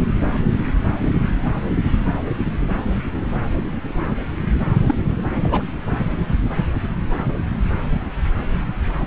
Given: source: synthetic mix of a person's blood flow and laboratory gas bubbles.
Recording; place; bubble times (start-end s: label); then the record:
Doppler ultrasound of blood flow; subclavian vein
4.86-4.95 s: bubbles
5.41-5.62 s: bubbles
From the record:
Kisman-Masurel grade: 212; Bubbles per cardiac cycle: several, 3 to 8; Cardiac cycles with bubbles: 1 to 10%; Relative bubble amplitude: moderate (0.250 to 0.450); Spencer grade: 1 (occasional bubble signal discernible with the cardiac motion signal, with majority of cardiac periods free of bubbles); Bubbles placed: anywhere in the cardiac cycle